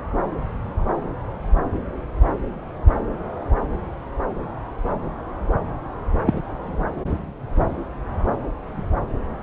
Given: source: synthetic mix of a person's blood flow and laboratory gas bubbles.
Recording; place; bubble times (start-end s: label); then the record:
Doppler ultrasound of blood flow; subclavian vein
6.26-6.42 s: bubbles
From the record:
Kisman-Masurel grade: 113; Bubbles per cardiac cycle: 1 to 2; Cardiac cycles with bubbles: 1 to 10%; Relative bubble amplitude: loud (0.450 to 0.775); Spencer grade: 1 (occasional bubble signal discernible with the cardiac motion signal, with majority of cardiac periods free of bubbles); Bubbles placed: anywhere in the cardiac cycle